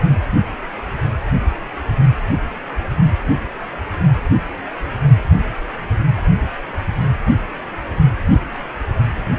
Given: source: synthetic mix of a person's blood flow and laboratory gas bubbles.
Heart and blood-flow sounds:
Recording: Doppler ultrasound of blood flow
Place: precordium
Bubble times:
no bubbles
From the record:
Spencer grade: 0 (complete lack of bubble signals)

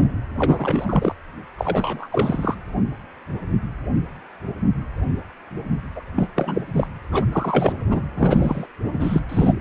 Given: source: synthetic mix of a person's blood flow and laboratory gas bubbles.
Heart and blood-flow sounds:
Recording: Doppler ultrasound of blood flow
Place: precordium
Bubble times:
0.38-1.15 s: bubbles
1.57-2.08 s: bubbles
2.10-2.54 s: bubbles
5.96-6.03 s: bubbles
6.15-6.28 s: bubbles
6.36-6.62 s: bubbles
6.75-6.87 s: bubbles
7.11-7.26 s: bubbles
7.32-7.72 s: bubbles
7.91-8.02 s: bubbles
8.17-8.66 s: bubbles
8.93-9.21 s: bubbles
9.29-9.54 s: bubbles
From the record:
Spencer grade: 3 (all of the cardiac periods contain showers or single bubble signals, but not dominating or overriding the cardiac motion signals)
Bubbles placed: anywhere in the cardiac cycle

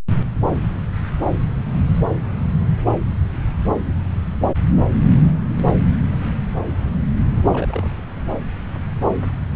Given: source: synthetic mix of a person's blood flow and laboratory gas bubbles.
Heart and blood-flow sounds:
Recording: Doppler ultrasound of blood flow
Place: subclavian vein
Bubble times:
7.49-7.90 s: bubbles
From the record:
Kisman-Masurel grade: 211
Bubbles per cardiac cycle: several, 3 to 8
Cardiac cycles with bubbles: 1 to 10%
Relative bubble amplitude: barely perceptible (0.100 to 0.250)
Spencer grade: 1 (occasional bubble signal discernible with the cardiac motion signal, with majority of cardiac periods free of bubbles)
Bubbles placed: anywhere in the cardiac cycle

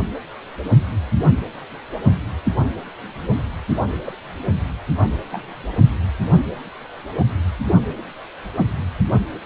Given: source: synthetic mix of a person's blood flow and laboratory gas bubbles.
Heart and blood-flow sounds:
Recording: Doppler ultrasound of blood flow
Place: precordium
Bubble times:
4.06-4.15 s: bubbles
5.31-5.47 s: bubbles
From the record:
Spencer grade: 2 (many but less than half of the cardiac periods contain bubble signals, singularly or in groups)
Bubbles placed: only in the low amplitude regions of the cardiac cycle

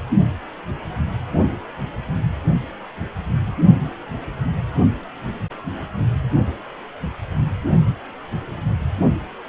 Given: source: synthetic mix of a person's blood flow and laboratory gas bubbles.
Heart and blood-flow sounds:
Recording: Doppler ultrasound of blood flow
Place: precordium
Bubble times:
no bubbles
From the record:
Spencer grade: 0 (complete lack of bubble signals)

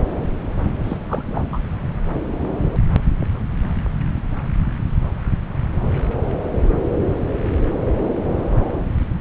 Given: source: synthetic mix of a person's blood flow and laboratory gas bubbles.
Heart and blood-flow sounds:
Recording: Doppler ultrasound of blood flow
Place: subclavian vein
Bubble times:
0.84-0.97 s: bubbles
1.07-1.58 s: bubbles
From the record:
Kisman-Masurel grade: 212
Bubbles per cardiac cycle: several, 3 to 8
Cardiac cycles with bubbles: 1 to 10%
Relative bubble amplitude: moderate (0.250 to 0.450)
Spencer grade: 1 (occasional bubble signal discernible with the cardiac motion signal, with majority of cardiac periods free of bubbles)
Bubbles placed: anywhere in the cardiac cycle

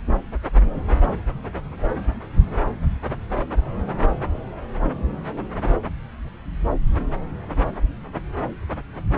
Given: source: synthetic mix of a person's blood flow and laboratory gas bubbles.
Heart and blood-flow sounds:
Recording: Doppler ultrasound of blood flow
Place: subclavian vein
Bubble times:
no bubbles
From the record:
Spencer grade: 0 (complete lack of bubble signals)

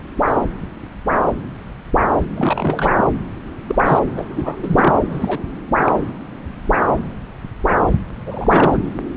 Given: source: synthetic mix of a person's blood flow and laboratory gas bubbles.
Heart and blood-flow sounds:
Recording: Doppler ultrasound of blood flow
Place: subclavian vein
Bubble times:
0.26-0.39 s: bubbles
2.36-2.92 s: bubbles
2.98-3.06 s: bubbles
3.68-3.75 s: bubbles
3.77-3.83 s: bubbles
3.85-3.99 s: bubbles
4.16-4.58 s: bubbles
4.62-4.93 s: bubbles
5.09-5.38 s: bubbles
5.85-6.00 s: bubbles
8.26-8.79 s: bubbles
From the record:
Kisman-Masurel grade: 222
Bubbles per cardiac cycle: several, 3 to 8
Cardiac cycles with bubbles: 10 to 50%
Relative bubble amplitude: moderate (0.250 to 0.450)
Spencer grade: 2 (many but less than half of the cardiac periods contain bubble signals, singularly or in groups)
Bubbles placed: anywhere in the cardiac cycle

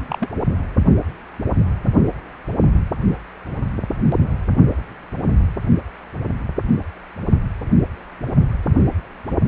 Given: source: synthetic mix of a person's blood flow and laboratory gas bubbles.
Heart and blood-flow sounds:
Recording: Doppler ultrasound of blood flow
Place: precordium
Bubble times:
0.08-0.30 s: bubbles
From the record:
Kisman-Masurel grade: 122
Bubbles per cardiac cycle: 1 to 2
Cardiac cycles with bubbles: 10 to 50%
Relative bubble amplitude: moderate (0.250 to 0.450)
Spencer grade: 2 (many but less than half of the cardiac periods contain bubble signals, singularly or in groups)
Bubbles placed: only in the low amplitude regions of the cardiac cycle

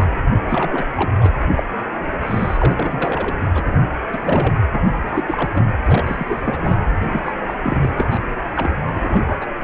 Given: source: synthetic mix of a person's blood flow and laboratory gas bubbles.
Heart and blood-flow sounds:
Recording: Doppler ultrasound of blood flow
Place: precordium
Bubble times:
0.00-0.06 s: bubbles
0.46-0.85 s: bubbles
0.96-1.11 s: bubbles
1.21-1.29 s: bubbles
1.54-1.63 s: bubbles
2.22-3.38 s: bubbles
3.41-3.45 s: bubbles
3.54-3.76 s: bubbles
4.12-4.54 s: bubbles
4.73-4.82 s: bubbles
5.07-5.50 s: bubbles
5.54-5.65 s: bubbles
5.85-6.40 s: bubbles
6.44-6.77 s: bubbles
7.02-7.21 s: bubbles
7.25-7.33 s: bubbles
7.47-7.54 s: bubbles
7.62-7.90 s: bubbles
7.97-8.19 s: bubbles
8.56-8.73 s: bubbles
8.87-9.21 s: bubbles
9.26-9.46 s: bubbles
From the record:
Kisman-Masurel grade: 342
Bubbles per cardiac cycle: rolling drumbeat, 9 or more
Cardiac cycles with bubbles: 100%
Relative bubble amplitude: moderate (0.250 to 0.450)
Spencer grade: 3 (all of the cardiac periods contain showers or single bubble signals, but not dominating or overriding the cardiac motion signals)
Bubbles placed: anywhere in the cardiac cycle

